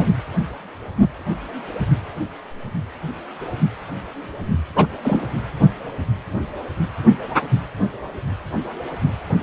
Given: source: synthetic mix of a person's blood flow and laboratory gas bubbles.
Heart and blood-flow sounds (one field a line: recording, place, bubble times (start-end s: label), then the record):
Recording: Doppler ultrasound of blood flow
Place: precordium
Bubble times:
0.00-0.05 s: bubbles
4.76-4.87 s: bubbles
5.04-5.26 s: bubbles
From the record:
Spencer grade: 2 (many but less than half of the cardiac periods contain bubble signals, singularly or in groups)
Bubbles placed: only in the low amplitude regions of the cardiac cycle